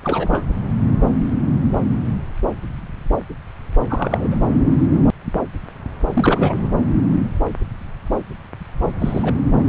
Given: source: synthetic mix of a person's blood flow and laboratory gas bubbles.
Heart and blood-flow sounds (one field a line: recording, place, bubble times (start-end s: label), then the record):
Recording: Doppler ultrasound of blood flow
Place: subclavian vein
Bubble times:
0.03-0.43 s: bubbles
3.89-4.36 s: bubbles
6.13-6.68 s: bubbles
9.00-9.34 s: bubbles
9.65-9.69 s: bubbles
From the record:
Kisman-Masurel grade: 222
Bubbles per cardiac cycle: several, 3 to 8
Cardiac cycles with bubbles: 10 to 50%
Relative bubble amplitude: moderate (0.250 to 0.450)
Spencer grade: 2 (many but less than half of the cardiac periods contain bubble signals, singularly or in groups)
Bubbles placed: anywhere in the cardiac cycle